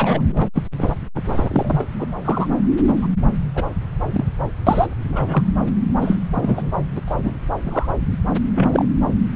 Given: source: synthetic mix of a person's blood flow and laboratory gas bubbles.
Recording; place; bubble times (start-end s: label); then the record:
Doppler ultrasound of blood flow; subclavian vein
0.00-0.48 s: bubbles
0.54-0.63 s: bubbles
0.78-0.91 s: bubbles
1.15-1.23 s: bubbles
1.29-1.86 s: bubbles
1.99-2.06 s: bubbles
2.24-2.48 s: bubbles
2.96-3.08 s: bubbles
3.55-3.65 s: bubbles
4.10-4.25 s: bubbles
4.67-4.87 s: bubbles
5.12-5.43 s: bubbles
6.01-6.17 s: bubbles
6.33-6.71 s: bubbles
6.97-7.01 s: bubbles
7.07-7.16 s: bubbles
7.22-7.33 s: bubbles
7.57-7.91 s: bubbles
8.54-8.85 s: bubbles
From the record:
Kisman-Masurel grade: 233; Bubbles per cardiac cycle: several, 3 to 8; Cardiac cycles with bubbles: 50 to 99%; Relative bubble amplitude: loud (0.450 to 0.775); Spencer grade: 3 (all of the cardiac periods contain showers or single bubble signals, but not dominating or overriding the cardiac motion signals); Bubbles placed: anywhere in the cardiac cycle